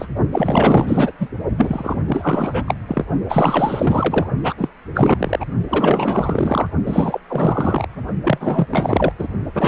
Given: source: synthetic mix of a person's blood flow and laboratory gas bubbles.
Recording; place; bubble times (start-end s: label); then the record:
Doppler ultrasound of blood flow; precordium
0.00-0.06 s: bubbles
0.32-1.12 s: bubbles
1.19-1.29 s: bubbles
1.57-2.75 s: bubbles
2.87-3.05 s: bubbles
3.29-4.26 s: bubbles
4.43-4.54 s: bubbles
4.57-4.68 s: bubbles
4.94-5.46 s: bubbles
5.68-6.69 s: bubbles
6.85-7.21 s: bubbles
7.28-7.87 s: bubbles
8.24-8.66 s: bubbles
8.70-9.12 s: bubbles
9.19-9.28 s: bubbles
9.54-9.68 s: bubbles
From the record:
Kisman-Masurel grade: 444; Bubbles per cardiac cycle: continuous sound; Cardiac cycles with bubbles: 100%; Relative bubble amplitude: maximal (0.775 to 0.999); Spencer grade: 4 (maximum detectable bubble signal sounding continuously throughout systole and diastole of every cardiac period, and overriding the amplitude of the normal cardiac signals); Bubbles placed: only in the low amplitude regions of the cardiac cycle